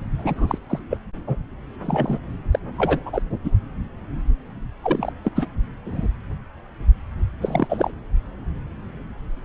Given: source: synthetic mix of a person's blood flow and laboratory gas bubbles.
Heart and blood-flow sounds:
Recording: Doppler ultrasound of blood flow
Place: subclavian vein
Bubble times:
0.18-0.58 s: bubbles
0.70-0.79 s: bubbles
0.90-0.97 s: bubbles
1.27-1.36 s: bubbles
1.82-2.19 s: bubbles
2.51-2.59 s: bubbles
2.78-3.00 s: bubbles
3.05-3.22 s: bubbles
3.44-3.51 s: bubbles
4.82-5.12 s: bubbles
5.24-5.29 s: bubbles
5.36-5.47 s: bubbles
5.85-6.07 s: bubbles
7.42-7.91 s: bubbles
From the record:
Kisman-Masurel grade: 232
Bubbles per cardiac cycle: several, 3 to 8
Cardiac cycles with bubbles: 50 to 99%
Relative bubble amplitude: moderate (0.250 to 0.450)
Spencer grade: 3 (all of the cardiac periods contain showers or single bubble signals, but not dominating or overriding the cardiac motion signals)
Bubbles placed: anywhere in the cardiac cycle

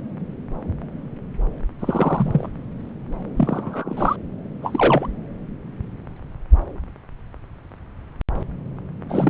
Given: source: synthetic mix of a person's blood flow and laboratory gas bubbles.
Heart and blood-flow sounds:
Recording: Doppler ultrasound of blood flow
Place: subclavian vein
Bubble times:
1.79-2.48 s: bubbles
3.37-3.94 s: bubbles
3.97-4.16 s: bubbles
4.62-5.07 s: bubbles
9.09-9.29 s: bubbles
From the record:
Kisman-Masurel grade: 222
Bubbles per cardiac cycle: several, 3 to 8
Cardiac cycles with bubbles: 10 to 50%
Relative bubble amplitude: moderate (0.250 to 0.450)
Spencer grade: 2 (many but less than half of the cardiac periods contain bubble signals, singularly or in groups)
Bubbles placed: anywhere in the cardiac cycle

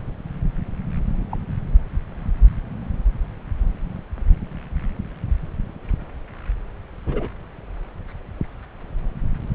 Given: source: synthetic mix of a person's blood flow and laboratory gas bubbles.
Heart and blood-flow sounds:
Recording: Doppler ultrasound of blood flow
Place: subclavian vein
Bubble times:
1.31-1.38 s: bubbles
7.06-7.29 s: bubbles
From the record:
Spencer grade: 2 (many but less than half of the cardiac periods contain bubble signals, singularly or in groups)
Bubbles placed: anywhere in the cardiac cycle

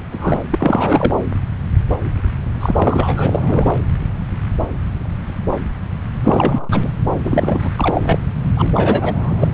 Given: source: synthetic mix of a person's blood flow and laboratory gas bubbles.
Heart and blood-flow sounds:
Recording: Doppler ultrasound of blood flow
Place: subclavian vein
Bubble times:
0.11-0.40 s: bubbles
0.51-1.14 s: bubbles
2.60-3.71 s: bubbles
6.23-6.92 s: bubbles
7.24-7.70 s: bubbles
7.76-8.18 s: bubbles
8.54-9.54 s: bubbles
From the record:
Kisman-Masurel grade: 333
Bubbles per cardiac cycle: rolling drumbeat, 9 or more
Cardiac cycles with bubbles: 50 to 99%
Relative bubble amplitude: loud (0.450 to 0.775)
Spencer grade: 3 (all of the cardiac periods contain showers or single bubble signals, but not dominating or overriding the cardiac motion signals)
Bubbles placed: anywhere in the cardiac cycle

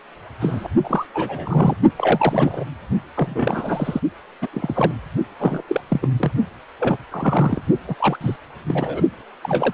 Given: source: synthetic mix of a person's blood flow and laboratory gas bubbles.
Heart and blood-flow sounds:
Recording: Doppler ultrasound of blood flow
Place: precordium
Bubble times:
0.40-0.68 s: bubbles
0.84-1.05 s: bubbles
1.14-1.74 s: bubbles
1.98-2.64 s: bubbles
3.16-4.00 s: bubbles
4.42-4.48 s: bubbles
4.53-4.94 s: bubbles
5.40-5.62 s: bubbles
5.67-5.81 s: bubbles
5.90-6.08 s: bubbles
6.19-6.32 s: bubbles
6.79-6.98 s: bubbles
7.11-7.62 s: bubbles
7.88-7.95 s: bubbles
7.99-8.36 s: bubbles
8.67-9.01 s: bubbles
9.44-9.74 s: bubbles
From the record:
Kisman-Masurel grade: 242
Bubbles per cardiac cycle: several, 3 to 8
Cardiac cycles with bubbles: 100%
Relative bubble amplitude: moderate (0.250 to 0.450)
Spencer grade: 3 (all of the cardiac periods contain showers or single bubble signals, but not dominating or overriding the cardiac motion signals)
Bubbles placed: only in the low amplitude regions of the cardiac cycle

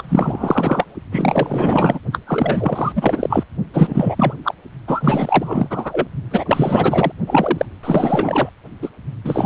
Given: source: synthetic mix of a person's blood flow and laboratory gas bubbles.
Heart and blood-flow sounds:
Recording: Doppler ultrasound of blood flow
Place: precordium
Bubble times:
0.00-0.85 s: bubbles
1.11-1.99 s: bubbles
2.12-2.19 s: bubbles
2.27-2.92 s: bubbles
2.95-3.44 s: bubbles
3.73-4.34 s: bubbles
4.43-4.54 s: bubbles
4.87-6.08 s: bubbles
6.31-7.12 s: bubbles
7.26-7.66 s: bubbles
7.83-8.49 s: bubbles
8.81-8.89 s: bubbles
9.24-9.46 s: bubbles
From the record:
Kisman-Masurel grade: 444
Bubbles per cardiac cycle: continuous sound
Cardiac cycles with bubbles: 100%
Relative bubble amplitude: maximal (0.775 to 0.999)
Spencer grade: 4 (maximum detectable bubble signal sounding continuously throughout systole and diastole of every cardiac period, and overriding the amplitude of the normal cardiac signals)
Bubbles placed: only in the low amplitude regions of the cardiac cycle

